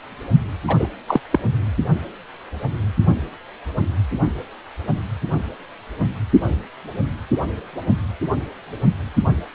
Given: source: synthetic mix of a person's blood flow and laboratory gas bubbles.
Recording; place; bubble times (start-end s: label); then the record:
Doppler ultrasound of blood flow; precordium
0.67-0.87 s: bubbles
1.08-1.21 s: bubbles
1.32-1.39 s: bubbles
From the record:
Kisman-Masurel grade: 213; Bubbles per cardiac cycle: several, 3 to 8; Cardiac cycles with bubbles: 1 to 10%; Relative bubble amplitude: loud (0.450 to 0.775); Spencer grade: 1 (occasional bubble signal discernible with the cardiac motion signal, with majority of cardiac periods free of bubbles); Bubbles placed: anywhere in the cardiac cycle